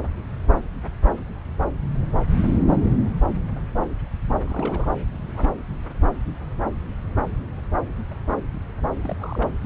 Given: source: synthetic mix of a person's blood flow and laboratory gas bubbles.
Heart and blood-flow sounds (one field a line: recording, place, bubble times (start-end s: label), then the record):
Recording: Doppler ultrasound of blood flow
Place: subclavian vein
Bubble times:
4.41-4.88 s: bubbles
5.12-5.51 s: bubbles
9.03-9.48 s: bubbles
From the record:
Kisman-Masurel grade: 221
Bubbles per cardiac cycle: several, 3 to 8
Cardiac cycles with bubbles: 10 to 50%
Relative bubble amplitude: barely perceptible (0.100 to 0.250)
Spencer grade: 2 (many but less than half of the cardiac periods contain bubble signals, singularly or in groups)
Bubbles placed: anywhere in the cardiac cycle